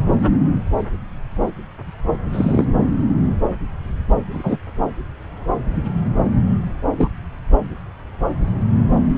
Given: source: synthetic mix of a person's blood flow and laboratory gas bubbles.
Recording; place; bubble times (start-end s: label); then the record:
Doppler ultrasound of blood flow; subclavian vein
0.07-0.38 s: bubbles
2.32-2.65 s: bubbles
4.33-4.57 s: bubbles
6.98-7.09 s: bubbles
From the record:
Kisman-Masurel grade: 123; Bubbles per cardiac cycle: 1 to 2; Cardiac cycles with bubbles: 10 to 50%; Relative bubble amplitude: loud (0.450 to 0.775); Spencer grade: 2 (many but less than half of the cardiac periods contain bubble signals, singularly or in groups); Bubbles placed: anywhere in the cardiac cycle